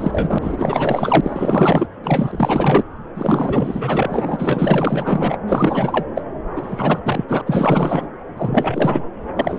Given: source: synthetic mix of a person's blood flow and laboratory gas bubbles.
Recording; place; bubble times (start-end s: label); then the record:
Doppler ultrasound of blood flow; subclavian vein
0.00-1.87 s: bubbles
2.04-2.84 s: bubbles
3.15-5.38 s: bubbles
5.47-6.07 s: bubbles
6.15-6.22 s: bubbles
6.55-7.00 s: bubbles
7.05-7.25 s: bubbles
7.28-7.42 s: bubbles
7.46-8.07 s: bubbles
8.37-9.05 s: bubbles
9.36-9.59 s: bubbles
From the record:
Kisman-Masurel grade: 444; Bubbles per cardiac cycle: continuous sound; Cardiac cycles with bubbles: 100%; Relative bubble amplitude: maximal (0.775 to 0.999); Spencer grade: 4 (maximum detectable bubble signal sounding continuously throughout systole and diastole of every cardiac period, and overriding the amplitude of the normal cardiac signals); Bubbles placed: anywhere in the cardiac cycle